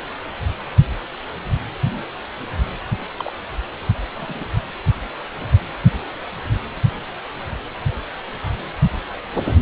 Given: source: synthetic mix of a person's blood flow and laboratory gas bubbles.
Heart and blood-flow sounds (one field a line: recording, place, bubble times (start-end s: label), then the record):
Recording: Doppler ultrasound of blood flow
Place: precordium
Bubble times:
3.18-3.33 s: bubbles
4.14-4.44 s: bubbles
From the record:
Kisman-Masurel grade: 121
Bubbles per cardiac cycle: 1 to 2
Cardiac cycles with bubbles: 10 to 50%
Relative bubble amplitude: barely perceptible (0.100 to 0.250)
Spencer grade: 2 (many but less than half of the cardiac periods contain bubble signals, singularly or in groups)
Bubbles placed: anywhere in the cardiac cycle